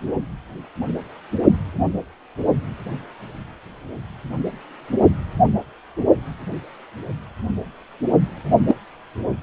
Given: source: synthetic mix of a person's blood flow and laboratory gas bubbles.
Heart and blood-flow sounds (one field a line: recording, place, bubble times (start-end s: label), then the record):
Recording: Doppler ultrasound of blood flow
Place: precordium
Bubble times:
8.67-8.74 s: bubbles
From the record:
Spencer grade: 2 (many but less than half of the cardiac periods contain bubble signals, singularly or in groups)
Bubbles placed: only in the low amplitude regions of the cardiac cycle